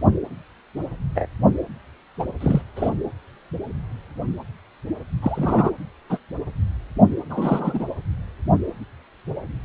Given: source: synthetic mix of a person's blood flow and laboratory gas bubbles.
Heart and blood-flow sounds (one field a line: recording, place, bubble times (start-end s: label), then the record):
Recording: Doppler ultrasound of blood flow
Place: precordium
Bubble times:
1.15-1.27 s: bubbles
2.19-2.25 s: bubbles
2.40-2.62 s: bubbles
2.75-2.90 s: bubbles
5.21-5.71 s: bubbles
6.09-6.18 s: bubbles
7.29-7.86 s: bubbles
From the record:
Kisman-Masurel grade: 122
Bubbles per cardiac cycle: 1 to 2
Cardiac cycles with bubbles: 10 to 50%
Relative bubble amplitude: moderate (0.250 to 0.450)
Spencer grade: 2 (many but less than half of the cardiac periods contain bubble signals, singularly or in groups)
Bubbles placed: anywhere in the cardiac cycle